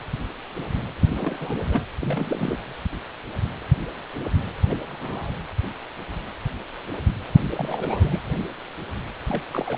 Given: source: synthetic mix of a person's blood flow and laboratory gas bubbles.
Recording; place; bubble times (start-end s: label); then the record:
Doppler ultrasound of blood flow; precordium
1.02-1.56 s: bubbles
1.68-1.81 s: bubbles
1.99-2.58 s: bubbles
4.69-4.77 s: bubbles
4.89-5.41 s: bubbles
7.55-8.20 s: bubbles
9.28-9.41 s: bubbles
9.51-9.78 s: bubbles
From the record:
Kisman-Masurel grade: 221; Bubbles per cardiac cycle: several, 3 to 8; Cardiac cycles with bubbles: 10 to 50%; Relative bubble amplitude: barely perceptible (0.100 to 0.250); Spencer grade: 2 (many but less than half of the cardiac periods contain bubble signals, singularly or in groups); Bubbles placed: anywhere in the cardiac cycle